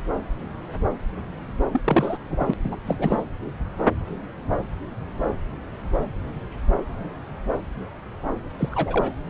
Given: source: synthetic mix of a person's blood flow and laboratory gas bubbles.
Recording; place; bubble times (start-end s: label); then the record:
Doppler ultrasound of blood flow; subclavian vein
1.73-1.81 s: bubbles
1.84-2.18 s: bubbles
2.30-2.54 s: bubbles
2.63-2.77 s: bubbles
2.86-3.23 s: bubbles
8.58-9.18 s: bubbles
From the record:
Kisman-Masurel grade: 222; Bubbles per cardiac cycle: several, 3 to 8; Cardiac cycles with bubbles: 10 to 50%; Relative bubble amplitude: moderate (0.250 to 0.450); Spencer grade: 2 (many but less than half of the cardiac periods contain bubble signals, singularly or in groups); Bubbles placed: anywhere in the cardiac cycle